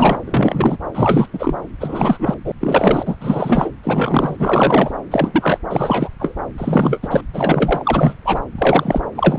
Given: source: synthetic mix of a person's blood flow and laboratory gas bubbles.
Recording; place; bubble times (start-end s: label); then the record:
Doppler ultrasound of blood flow; subclavian vein
0.00-0.20 s: bubbles
0.24-0.77 s: bubbles
0.95-1.27 s: bubbles
1.33-1.56 s: bubbles
1.80-2.34 s: bubbles
2.44-2.52 s: bubbles
2.60-3.17 s: bubbles
3.21-3.69 s: bubbles
3.83-4.92 s: bubbles
5.10-5.58 s: bubbles
5.68-6.08 s: bubbles
6.20-6.34 s: bubbles
6.58-7.08 s: bubbles
7.10-7.21 s: bubbles
7.33-8.16 s: bubbles
8.25-8.40 s: bubbles
8.58-9.01 s: bubbles
9.15-9.38 s: bubbles
From the record:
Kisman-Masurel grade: 343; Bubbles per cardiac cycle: rolling drumbeat, 9 or more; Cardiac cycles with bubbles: 100%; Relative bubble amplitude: loud (0.450 to 0.775); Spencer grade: 3 (all of the cardiac periods contain showers or single bubble signals, but not dominating or overriding the cardiac motion signals); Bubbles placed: anywhere in the cardiac cycle